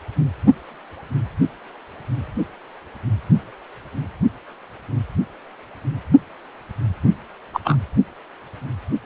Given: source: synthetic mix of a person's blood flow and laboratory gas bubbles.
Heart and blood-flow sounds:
Doppler ultrasound of blood flow; precordium
7.53-7.60 s: bubbles
7.64-7.77 s: bubbles
From the record:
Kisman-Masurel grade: 113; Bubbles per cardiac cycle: 1 to 2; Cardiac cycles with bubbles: 1 to 10%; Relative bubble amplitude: loud (0.450 to 0.775); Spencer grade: 1 (occasional bubble signal discernible with the cardiac motion signal, with majority of cardiac periods free of bubbles); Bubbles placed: only in the low amplitude regions of the cardiac cycle

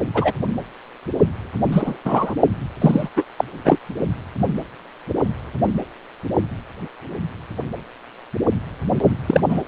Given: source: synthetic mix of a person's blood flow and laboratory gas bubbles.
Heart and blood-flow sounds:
Doppler ultrasound of blood flow; precordium
0.14-0.32 s: bubbles
1.72-1.97 s: bubbles
2.04-2.34 s: bubbles
2.80-3.09 s: bubbles
3.16-3.23 s: bubbles
3.38-3.44 s: bubbles
3.65-3.77 s: bubbles
9.27-9.41 s: bubbles
9.48-9.61 s: bubbles
From the record:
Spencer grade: 3 (all of the cardiac periods contain showers or single bubble signals, but not dominating or overriding the cardiac motion signals); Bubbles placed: anywhere in the cardiac cycle

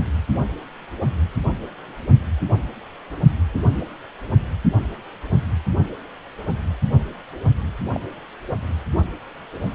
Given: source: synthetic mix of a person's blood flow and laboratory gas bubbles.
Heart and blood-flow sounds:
Doppler ultrasound of blood flow; precordium
3.54-3.60 s: bubbles
7.92-8.00 s: bubbles
From the record:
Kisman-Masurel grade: 121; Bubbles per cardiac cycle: 1 to 2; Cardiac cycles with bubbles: 10 to 50%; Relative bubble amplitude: barely perceptible (0.100 to 0.250); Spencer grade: 2 (many but less than half of the cardiac periods contain bubble signals, singularly or in groups); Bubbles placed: only in the low amplitude regions of the cardiac cycle

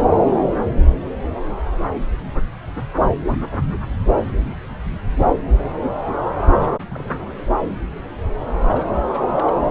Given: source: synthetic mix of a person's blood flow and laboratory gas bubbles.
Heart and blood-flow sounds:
Doppler ultrasound of blood flow; subclavian vein
3.27-3.40 s: bubbles
3.53-3.77 s: bubbles
4.21-4.26 s: bubbles
4.34-4.54 s: bubbles
4.93-4.98 s: bubbles
6.62-6.70 s: bubbles
6.89-7.37 s: bubbles
8.67-8.85 s: bubbles
8.92-9.03 s: bubbles
9.12-9.21 s: bubbles
9.30-9.64 s: bubbles
From the record:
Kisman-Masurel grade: 221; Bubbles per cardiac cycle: several, 3 to 8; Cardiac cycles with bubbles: 10 to 50%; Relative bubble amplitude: barely perceptible (0.100 to 0.250); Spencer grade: 2 (many but less than half of the cardiac periods contain bubble signals, singularly or in groups); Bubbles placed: anywhere in the cardiac cycle

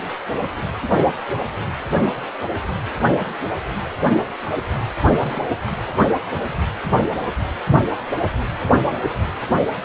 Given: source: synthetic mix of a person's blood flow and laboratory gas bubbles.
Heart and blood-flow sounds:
Doppler ultrasound of blood flow; precordium
5.19-5.43 s: bubbles
5.66-5.70 s: bubbles
5.86-5.93 s: bubbles
From the record:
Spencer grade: 1 (occasional bubble signal discernible with the cardiac motion signal, with majority of cardiac periods free of bubbles); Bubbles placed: only in the low amplitude regions of the cardiac cycle

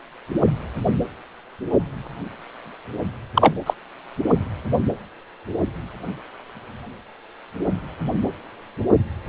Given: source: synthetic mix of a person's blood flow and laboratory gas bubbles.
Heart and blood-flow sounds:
Doppler ultrasound of blood flow; precordium
3.33-3.54 s: bubbles
3.66-3.74 s: bubbles
From the record:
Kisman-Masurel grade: 213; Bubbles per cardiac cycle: several, 3 to 8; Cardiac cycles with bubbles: 1 to 10%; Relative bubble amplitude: loud (0.450 to 0.775); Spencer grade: 1 (occasional bubble signal discernible with the cardiac motion signal, with majority of cardiac periods free of bubbles); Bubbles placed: anywhere in the cardiac cycle

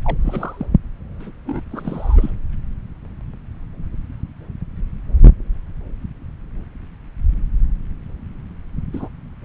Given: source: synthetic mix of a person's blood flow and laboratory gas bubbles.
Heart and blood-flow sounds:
Doppler ultrasound of blood flow; subclavian vein
0.02-0.17 s: bubbles
0.21-0.68 s: bubbles
1.20-1.31 s: bubbles
1.47-1.61 s: bubbles
1.72-2.30 s: bubbles
8.93-9.09 s: bubbles
From the record:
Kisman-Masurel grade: 221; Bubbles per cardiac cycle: several, 3 to 8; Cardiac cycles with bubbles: 10 to 50%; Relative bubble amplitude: barely perceptible (0.100 to 0.250); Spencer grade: 2 (many but less than half of the cardiac periods contain bubble signals, singularly or in groups); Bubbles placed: anywhere in the cardiac cycle

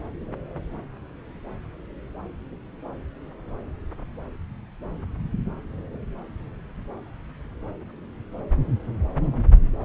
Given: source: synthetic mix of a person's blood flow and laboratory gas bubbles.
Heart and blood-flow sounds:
Doppler ultrasound of blood flow; subclavian vein
no bubbles
From the record:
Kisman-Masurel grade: 000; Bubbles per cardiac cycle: 0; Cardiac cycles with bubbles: 0%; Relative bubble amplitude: no bubbles discernible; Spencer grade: 0 (complete lack of bubble signals)

